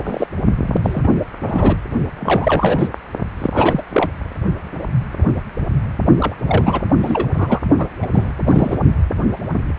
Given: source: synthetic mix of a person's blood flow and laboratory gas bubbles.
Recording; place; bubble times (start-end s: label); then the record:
Doppler ultrasound of blood flow; precordium
0.00-0.26 s: bubbles
0.63-1.08 s: bubbles
1.46-1.76 s: bubbles
2.19-2.89 s: bubbles
3.38-3.50 s: bubbles
3.52-3.82 s: bubbles
3.90-4.12 s: bubbles
6.20-6.35 s: bubbles
6.46-6.83 s: bubbles
7.03-7.29 s: bubbles
7.33-7.59 s: bubbles
7.78-7.87 s: bubbles
8.02-8.06 s: bubbles
8.13-8.31 s: bubbles
8.47-8.79 s: bubbles
From the record:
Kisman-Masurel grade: 332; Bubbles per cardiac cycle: rolling drumbeat, 9 or more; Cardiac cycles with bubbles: 50 to 99%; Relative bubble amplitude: moderate (0.250 to 0.450); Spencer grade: 3 (all of the cardiac periods contain showers or single bubble signals, but not dominating or overriding the cardiac motion signals); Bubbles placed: only in the low amplitude regions of the cardiac cycle